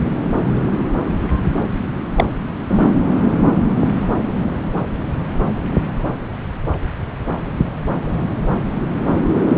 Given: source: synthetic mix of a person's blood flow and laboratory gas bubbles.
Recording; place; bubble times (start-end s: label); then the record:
Doppler ultrasound of blood flow; subclavian vein
2.15-2.26 s: bubbles
From the record:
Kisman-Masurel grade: 113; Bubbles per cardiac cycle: 1 to 2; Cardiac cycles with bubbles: 1 to 10%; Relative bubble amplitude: loud (0.450 to 0.775); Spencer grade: 1 (occasional bubble signal discernible with the cardiac motion signal, with majority of cardiac periods free of bubbles); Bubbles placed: anywhere in the cardiac cycle